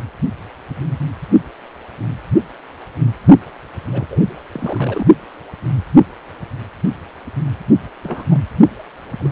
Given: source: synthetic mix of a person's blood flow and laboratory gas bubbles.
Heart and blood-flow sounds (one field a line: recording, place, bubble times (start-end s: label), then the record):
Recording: Doppler ultrasound of blood flow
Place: precordium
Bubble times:
3.88-4.07 s: bubbles
4.11-4.20 s: bubbles
4.53-5.05 s: bubbles
8.03-8.23 s: bubbles
8.30-8.42 s: bubbles
9.17-9.32 s: bubbles
From the record:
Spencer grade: 2 (many but less than half of the cardiac periods contain bubble signals, singularly or in groups)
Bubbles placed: only in the low amplitude regions of the cardiac cycle